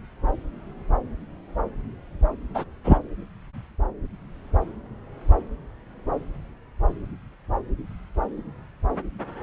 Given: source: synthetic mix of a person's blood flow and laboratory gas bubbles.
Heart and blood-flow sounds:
Doppler ultrasound of blood flow; subclavian vein
2.54-2.65 s: bubbles
2.84-2.98 s: bubbles
From the record:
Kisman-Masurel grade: 113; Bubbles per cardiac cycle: 1 to 2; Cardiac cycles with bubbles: 1 to 10%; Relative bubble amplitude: loud (0.450 to 0.775); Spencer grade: 1 (occasional bubble signal discernible with the cardiac motion signal, with majority of cardiac periods free of bubbles); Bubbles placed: anywhere in the cardiac cycle

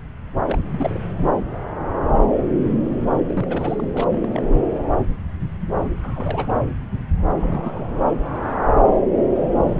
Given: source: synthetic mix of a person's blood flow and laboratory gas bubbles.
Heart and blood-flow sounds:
Doppler ultrasound of blood flow; subclavian vein
0.45-0.99 s: bubbles
3.27-3.89 s: bubbles
3.94-4.28 s: bubbles
4.33-4.42 s: bubbles
5.78-5.91 s: bubbles
6.03-6.57 s: bubbles
7.41-7.87 s: bubbles
From the record:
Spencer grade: 2 (many but less than half of the cardiac periods contain bubble signals, singularly or in groups); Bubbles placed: anywhere in the cardiac cycle

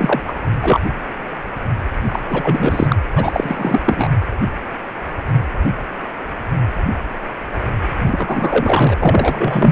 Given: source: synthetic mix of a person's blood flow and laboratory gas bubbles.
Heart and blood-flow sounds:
Doppler ultrasound of blood flow; precordium
0.00-0.22 s: bubbles
0.24-0.33 s: bubbles
0.62-0.80 s: bubbles
2.06-2.19 s: bubbles
2.30-2.96 s: bubbles
3.16-3.81 s: bubbles
3.86-4.08 s: bubbles
8.05-8.96 s: bubbles
9.00-9.72 s: bubbles
From the record:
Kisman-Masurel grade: 333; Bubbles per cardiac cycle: rolling drumbeat, 9 or more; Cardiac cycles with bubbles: 50 to 99%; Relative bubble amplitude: loud (0.450 to 0.775); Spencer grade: 3 (all of the cardiac periods contain showers or single bubble signals, but not dominating or overriding the cardiac motion signals); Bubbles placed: anywhere in the cardiac cycle

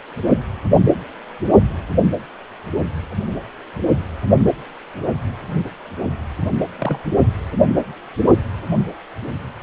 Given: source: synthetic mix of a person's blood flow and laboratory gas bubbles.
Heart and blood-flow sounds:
Doppler ultrasound of blood flow; precordium
6.58-6.66 s: bubbles
6.79-6.99 s: bubbles
From the record:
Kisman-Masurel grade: 112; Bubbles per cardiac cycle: 1 to 2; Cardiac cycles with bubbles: 1 to 10%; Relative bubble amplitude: moderate (0.250 to 0.450); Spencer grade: 1 (occasional bubble signal discernible with the cardiac motion signal, with majority of cardiac periods free of bubbles); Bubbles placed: only in the low amplitude regions of the cardiac cycle

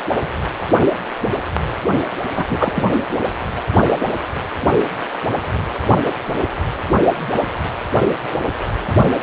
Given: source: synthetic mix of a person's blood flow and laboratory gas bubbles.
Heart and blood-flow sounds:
Doppler ultrasound of blood flow; precordium
2.36-2.95 s: bubbles
3.11-3.17 s: bubbles
From the record:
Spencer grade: 2 (many but less than half of the cardiac periods contain bubble signals, singularly or in groups); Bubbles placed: only in the low amplitude regions of the cardiac cycle

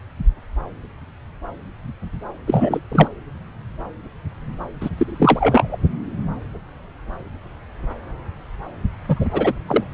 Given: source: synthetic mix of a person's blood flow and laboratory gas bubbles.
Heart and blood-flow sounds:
Doppler ultrasound of blood flow; subclavian vein
2.46-2.80 s: bubbles
2.92-3.08 s: bubbles
4.80-4.89 s: bubbles
4.97-5.76 s: bubbles
9.08-9.26 s: bubbles
9.30-9.53 s: bubbles
9.66-9.84 s: bubbles
From the record:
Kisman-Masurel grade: 223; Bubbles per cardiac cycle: several, 3 to 8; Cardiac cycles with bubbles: 10 to 50%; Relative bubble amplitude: loud (0.450 to 0.775); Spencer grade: 2 (many but less than half of the cardiac periods contain bubble signals, singularly or in groups); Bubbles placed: anywhere in the cardiac cycle

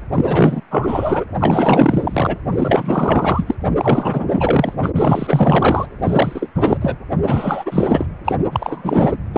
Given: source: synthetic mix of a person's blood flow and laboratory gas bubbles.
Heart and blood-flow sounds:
Doppler ultrasound of blood flow; precordium
0.15-0.61 s: bubbles
0.71-1.24 s: bubbles
1.39-2.38 s: bubbles
2.55-3.55 s: bubbles
3.75-4.74 s: bubbles
4.82-4.91 s: bubbles
4.96-5.88 s: bubbles
6.02-6.50 s: bubbles
6.55-6.78 s: bubbles
6.81-6.96 s: bubbles
7.27-8.06 s: bubbles
8.25-8.36 s: bubbles
8.52-9.12 s: bubbles
9.33-9.38 s: bubbles
From the record:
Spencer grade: 4 (maximum detectable bubble signal sounding continuously throughout systole and diastole of every cardiac period, and overriding the amplitude of the normal cardiac signals); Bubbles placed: anywhere in the cardiac cycle

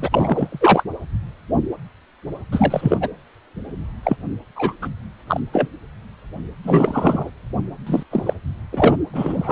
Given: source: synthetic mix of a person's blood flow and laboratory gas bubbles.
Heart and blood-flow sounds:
Doppler ultrasound of blood flow; precordium
0.00-0.09 s: bubbles
0.12-0.83 s: bubbles
2.52-2.98 s: bubbles
3.00-3.10 s: bubbles
4.03-4.17 s: bubbles
4.55-4.73 s: bubbles
4.82-4.88 s: bubbles
5.26-5.41 s: bubbles
5.53-5.68 s: bubbles
6.63-7.30 s: bubbles
7.86-8.03 s: bubbles
8.11-8.33 s: bubbles
8.72-8.97 s: bubbles
9.13-9.52 s: bubbles
From the record:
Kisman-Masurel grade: 233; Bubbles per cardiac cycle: several, 3 to 8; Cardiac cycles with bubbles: 50 to 99%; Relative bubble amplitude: loud (0.450 to 0.775); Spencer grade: 3 (all of the cardiac periods contain showers or single bubble signals, but not dominating or overriding the cardiac motion signals); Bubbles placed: anywhere in the cardiac cycle

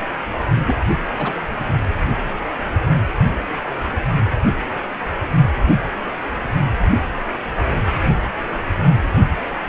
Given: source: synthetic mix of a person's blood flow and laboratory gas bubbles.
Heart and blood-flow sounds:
Doppler ultrasound of blood flow; precordium
0.67-0.76 s: bubbles
1.17-1.33 s: bubbles
From the record:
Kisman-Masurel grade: 212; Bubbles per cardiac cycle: several, 3 to 8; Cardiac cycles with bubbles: 1 to 10%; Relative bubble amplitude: moderate (0.250 to 0.450); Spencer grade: 1 (occasional bubble signal discernible with the cardiac motion signal, with majority of cardiac periods free of bubbles); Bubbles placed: only in the low amplitude regions of the cardiac cycle

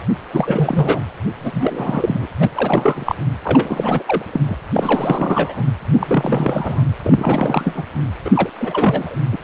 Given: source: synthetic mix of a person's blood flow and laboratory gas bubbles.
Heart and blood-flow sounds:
Doppler ultrasound of blood flow; precordium
0.33-1.00 s: bubbles
1.39-2.28 s: bubbles
2.40-2.51 s: bubbles
2.55-3.15 s: bubbles
3.44-4.03 s: bubbles
4.07-4.57 s: bubbles
4.72-5.67 s: bubbles
5.93-6.83 s: bubbles
7.04-7.86 s: bubbles
8.24-8.30 s: bubbles
8.33-8.49 s: bubbles
8.60-9.16 s: bubbles
9.32-9.38 s: bubbles
From the record:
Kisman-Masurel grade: 342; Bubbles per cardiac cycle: rolling drumbeat, 9 or more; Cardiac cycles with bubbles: 100%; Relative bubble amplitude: moderate (0.250 to 0.450); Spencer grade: 3 (all of the cardiac periods contain showers or single bubble signals, but not dominating or overriding the cardiac motion signals); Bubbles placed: anywhere in the cardiac cycle

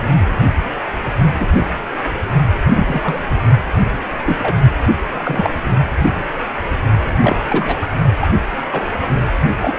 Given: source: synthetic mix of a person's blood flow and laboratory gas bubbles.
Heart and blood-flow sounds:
Doppler ultrasound of blood flow; precordium
1.40-1.48 s: bubbles
1.53-1.64 s: bubbles
2.73-3.21 s: bubbles
4.25-4.38 s: bubbles
4.42-4.57 s: bubbles
5.24-5.50 s: bubbles
7.20-7.37 s: bubbles
7.44-7.79 s: bubbles
7.82-7.88 s: bubbles
8.21-8.28 s: bubbles
8.71-8.87 s: bubbles
9.03-9.07 s: bubbles
9.62-9.73 s: bubbles
From the record:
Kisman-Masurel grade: 232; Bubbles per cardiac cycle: several, 3 to 8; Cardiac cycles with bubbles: 50 to 99%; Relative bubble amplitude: moderate (0.250 to 0.450); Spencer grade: 3 (all of the cardiac periods contain showers or single bubble signals, but not dominating or overriding the cardiac motion signals); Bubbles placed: only in the low amplitude regions of the cardiac cycle

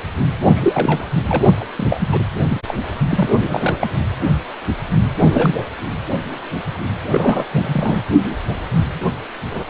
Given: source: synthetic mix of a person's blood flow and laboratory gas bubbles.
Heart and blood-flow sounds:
Doppler ultrasound of blood flow; precordium
0.42-1.06 s: bubbles
1.28-1.65 s: bubbles
1.76-2.08 s: bubbles
2.12-2.25 s: bubbles
2.48-2.62 s: bubbles
2.67-2.79 s: bubbles
3.10-3.29 s: bubbles
3.41-3.77 s: bubbles
3.81-3.87 s: bubbles
5.17-5.55 s: bubbles
7.07-7.46 s: bubbles
7.51-8.02 s: bubbles
From the record:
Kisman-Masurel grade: 232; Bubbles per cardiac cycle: several, 3 to 8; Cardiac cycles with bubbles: 50 to 99%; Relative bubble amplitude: moderate (0.250 to 0.450); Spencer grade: 3 (all of the cardiac periods contain showers or single bubble signals, but not dominating or overriding the cardiac motion signals); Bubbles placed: anywhere in the cardiac cycle

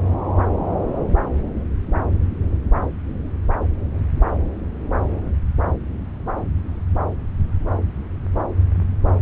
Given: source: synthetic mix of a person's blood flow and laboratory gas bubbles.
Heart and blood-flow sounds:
Doppler ultrasound of blood flow; subclavian vein
no bubbles
From the record:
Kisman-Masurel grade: 000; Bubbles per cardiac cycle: 0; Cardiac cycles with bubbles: 0%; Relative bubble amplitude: no bubbles discernible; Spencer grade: 0 (complete lack of bubble signals)

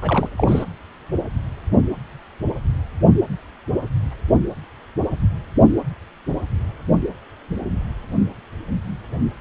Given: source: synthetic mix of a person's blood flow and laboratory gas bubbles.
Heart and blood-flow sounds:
Doppler ultrasound of blood flow; precordium
0.00-0.29 s: bubbles
0.37-0.64 s: bubbles
From the record:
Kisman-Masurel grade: 212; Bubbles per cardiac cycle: several, 3 to 8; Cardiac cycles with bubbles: 1 to 10%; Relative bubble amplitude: moderate (0.250 to 0.450); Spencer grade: 1 (occasional bubble signal discernible with the cardiac motion signal, with majority of cardiac periods free of bubbles); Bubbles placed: anywhere in the cardiac cycle

